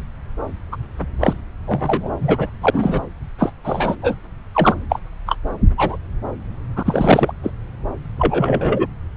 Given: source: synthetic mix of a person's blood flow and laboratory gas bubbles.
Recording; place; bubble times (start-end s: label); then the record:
Doppler ultrasound of blood flow; subclavian vein
0.71-0.76 s: bubbles
1.19-1.33 s: bubbles
1.66-2.09 s: bubbles
2.21-2.50 s: bubbles
2.61-2.71 s: bubbles
2.73-3.00 s: bubbles
3.38-3.52 s: bubbles
3.64-3.95 s: bubbles
4.02-4.15 s: bubbles
4.54-4.75 s: bubbles
4.89-5.00 s: bubbles
5.27-5.36 s: bubbles
5.77-5.97 s: bubbles
6.76-7.32 s: bubbles
7.43-7.51 s: bubbles
8.18-8.87 s: bubbles
From the record:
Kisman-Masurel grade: 243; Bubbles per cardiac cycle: several, 3 to 8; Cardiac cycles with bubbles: 100%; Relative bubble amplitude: loud (0.450 to 0.775); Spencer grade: 3 (all of the cardiac periods contain showers or single bubble signals, but not dominating or overriding the cardiac motion signals); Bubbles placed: anywhere in the cardiac cycle